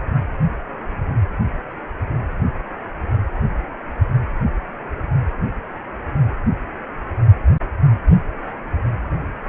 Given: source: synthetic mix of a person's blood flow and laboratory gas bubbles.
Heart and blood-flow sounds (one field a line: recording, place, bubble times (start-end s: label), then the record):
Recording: Doppler ultrasound of blood flow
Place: precordium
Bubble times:
no bubbles
From the record:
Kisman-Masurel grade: 000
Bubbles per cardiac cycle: 0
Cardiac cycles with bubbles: 0%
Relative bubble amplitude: no bubbles discernible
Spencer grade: 0 (complete lack of bubble signals)